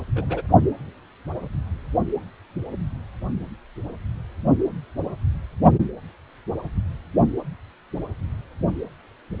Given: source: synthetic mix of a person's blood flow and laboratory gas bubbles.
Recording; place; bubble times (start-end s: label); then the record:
Doppler ultrasound of blood flow; precordium
0.15-0.42 s: bubbles
From the record:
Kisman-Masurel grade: 112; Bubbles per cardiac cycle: 1 to 2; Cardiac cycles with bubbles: 1 to 10%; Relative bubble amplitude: moderate (0.250 to 0.450); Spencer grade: 1 (occasional bubble signal discernible with the cardiac motion signal, with majority of cardiac periods free of bubbles); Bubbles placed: only in the low amplitude regions of the cardiac cycle